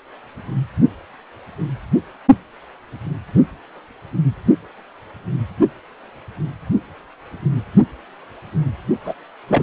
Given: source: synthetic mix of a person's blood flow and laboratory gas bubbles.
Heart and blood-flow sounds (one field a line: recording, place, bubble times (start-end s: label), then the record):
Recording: Doppler ultrasound of blood flow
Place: precordium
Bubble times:
9.05-9.14 s: bubbles
9.48-9.63 s: bubbles
From the record:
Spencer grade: 1 (occasional bubble signal discernible with the cardiac motion signal, with majority of cardiac periods free of bubbles)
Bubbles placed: only in the low amplitude regions of the cardiac cycle